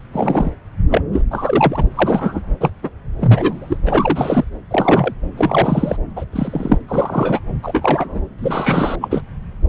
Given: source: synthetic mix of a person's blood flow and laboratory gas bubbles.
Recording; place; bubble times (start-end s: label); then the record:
Doppler ultrasound of blood flow; subclavian vein
0.12-0.51 s: bubbles
0.90-1.01 s: bubbles
1.12-1.21 s: bubbles
1.30-1.82 s: bubbles
1.93-2.41 s: bubbles
2.60-2.70 s: bubbles
2.83-2.90 s: bubbles
3.20-3.77 s: bubbles
3.86-4.45 s: bubbles
4.71-5.14 s: bubbles
5.37-5.96 s: bubbles
6.16-6.25 s: bubbles
6.32-6.78 s: bubbles
6.88-7.40 s: bubbles
7.62-8.21 s: bubbles
8.38-8.96 s: bubbles
9.01-9.21 s: bubbles
From the record:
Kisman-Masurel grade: 243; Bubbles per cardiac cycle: several, 3 to 8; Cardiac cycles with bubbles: 100%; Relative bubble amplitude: loud (0.450 to 0.775); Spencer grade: 3 (all of the cardiac periods contain showers or single bubble signals, but not dominating or overriding the cardiac motion signals); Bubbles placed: anywhere in the cardiac cycle